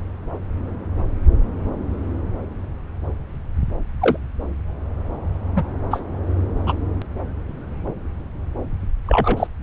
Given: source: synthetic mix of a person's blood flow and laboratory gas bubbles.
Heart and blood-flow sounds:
Doppler ultrasound of blood flow; subclavian vein
4.01-4.18 s: bubbles
5.56-5.63 s: bubbles
5.90-6.02 s: bubbles
6.67-6.73 s: bubbles
9.06-9.47 s: bubbles
From the record:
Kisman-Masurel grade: 123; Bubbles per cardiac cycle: 1 to 2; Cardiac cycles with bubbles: 10 to 50%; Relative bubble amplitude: loud (0.450 to 0.775); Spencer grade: 2 (many but less than half of the cardiac periods contain bubble signals, singularly or in groups); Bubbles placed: anywhere in the cardiac cycle

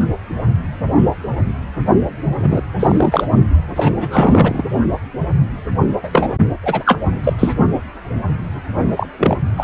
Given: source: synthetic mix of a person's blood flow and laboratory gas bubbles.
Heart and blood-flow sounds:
Doppler ultrasound of blood flow; precordium
2.39-2.62 s: bubbles
2.79-3.27 s: bubbles
3.75-4.64 s: bubbles
6.02-6.36 s: bubbles
6.62-6.99 s: bubbles
7.24-7.33 s: bubbles
7.38-7.53 s: bubbles
8.96-9.07 s: bubbles
9.18-9.37 s: bubbles
9.56-9.64 s: bubbles
From the record:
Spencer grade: 2 (many but less than half of the cardiac periods contain bubble signals, singularly or in groups); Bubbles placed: only in the low amplitude regions of the cardiac cycle

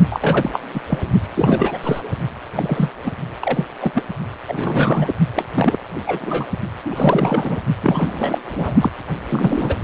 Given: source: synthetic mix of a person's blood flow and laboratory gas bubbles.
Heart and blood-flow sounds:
Doppler ultrasound of blood flow; precordium
0.10-0.51 s: bubbles
0.53-0.59 s: bubbles
0.74-0.81 s: bubbles
0.89-0.98 s: bubbles
1.34-1.78 s: bubbles
1.83-2.01 s: bubbles
2.54-2.92 s: bubbles
3.03-3.11 s: bubbles
3.41-3.65 s: bubbles
3.81-3.92 s: bubbles
3.94-4.03 s: bubbles
4.48-5.15 s: bubbles
5.36-5.44 s: bubbles
5.54-5.78 s: bubbles
6.07-6.46 s: bubbles
6.84-7.57 s: bubbles
7.81-8.38 s: bubbles
8.42-8.75 s: bubbles
8.80-8.91 s: bubbles
9.29-9.76 s: bubbles
From the record:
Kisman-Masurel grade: 343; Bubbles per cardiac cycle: rolling drumbeat, 9 or more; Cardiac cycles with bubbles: 100%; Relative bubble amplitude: loud (0.450 to 0.775); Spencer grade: 3 (all of the cardiac periods contain showers or single bubble signals, but not dominating or overriding the cardiac motion signals); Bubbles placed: only in the low amplitude regions of the cardiac cycle

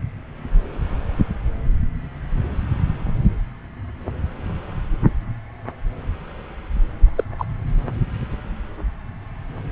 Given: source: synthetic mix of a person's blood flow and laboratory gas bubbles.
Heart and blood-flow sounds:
Doppler ultrasound of blood flow; subclavian vein
7.16-7.24 s: bubbles
7.38-7.45 s: bubbles
From the record:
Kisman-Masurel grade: 122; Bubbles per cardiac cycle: 1 to 2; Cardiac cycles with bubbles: 10 to 50%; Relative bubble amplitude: moderate (0.250 to 0.450); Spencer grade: 2 (many but less than half of the cardiac periods contain bubble signals, singularly or in groups); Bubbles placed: anywhere in the cardiac cycle

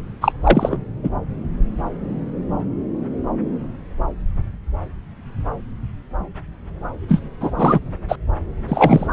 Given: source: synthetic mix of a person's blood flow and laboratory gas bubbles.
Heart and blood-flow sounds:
Doppler ultrasound of blood flow; subclavian vein
0.21-0.32 s: bubbles
0.43-0.78 s: bubbles
1.03-1.10 s: bubbles
7.08-7.21 s: bubbles
7.41-7.52 s: bubbles
7.56-7.79 s: bubbles
8.08-8.16 s: bubbles
8.68-9.07 s: bubbles
From the record:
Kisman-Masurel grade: 223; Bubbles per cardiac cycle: several, 3 to 8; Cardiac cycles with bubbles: 10 to 50%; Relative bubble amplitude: loud (0.450 to 0.775); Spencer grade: 2 (many but less than half of the cardiac periods contain bubble signals, singularly or in groups); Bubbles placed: anywhere in the cardiac cycle

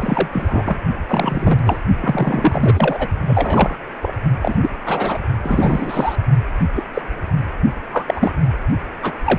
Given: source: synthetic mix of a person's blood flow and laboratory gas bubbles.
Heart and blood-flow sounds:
Doppler ultrasound of blood flow; precordium
0.00-0.28 s: bubbles
0.32-0.79 s: bubbles
1.08-1.59 s: bubbles
1.66-1.80 s: bubbles
2.01-3.08 s: bubbles
3.27-3.78 s: bubbles
4.01-4.14 s: bubbles
4.41-4.55 s: bubbles
4.61-4.70 s: bubbles
4.85-5.18 s: bubbles
5.43-6.15 s: bubbles
6.60-6.68 s: bubbles
6.75-6.84 s: bubbles
6.93-7.02 s: bubbles
7.92-8.33 s: bubbles
9.02-9.17 s: bubbles
9.24-9.39 s: bubbles
From the record:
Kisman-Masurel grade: 243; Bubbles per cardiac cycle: several, 3 to 8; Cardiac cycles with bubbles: 100%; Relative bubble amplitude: loud (0.450 to 0.775); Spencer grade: 3 (all of the cardiac periods contain showers or single bubble signals, but not dominating or overriding the cardiac motion signals); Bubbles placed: only in the low amplitude regions of the cardiac cycle

